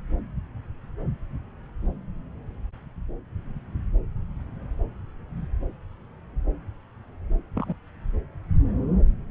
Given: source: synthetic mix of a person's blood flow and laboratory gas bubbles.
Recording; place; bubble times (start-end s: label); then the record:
Doppler ultrasound of blood flow; subclavian vein
7.54-7.74 s: bubbles
From the record:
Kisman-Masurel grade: 111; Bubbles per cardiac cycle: 1 to 2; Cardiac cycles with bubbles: 1 to 10%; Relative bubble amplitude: barely perceptible (0.100 to 0.250); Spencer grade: 1 (occasional bubble signal discernible with the cardiac motion signal, with majority of cardiac periods free of bubbles); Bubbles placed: anywhere in the cardiac cycle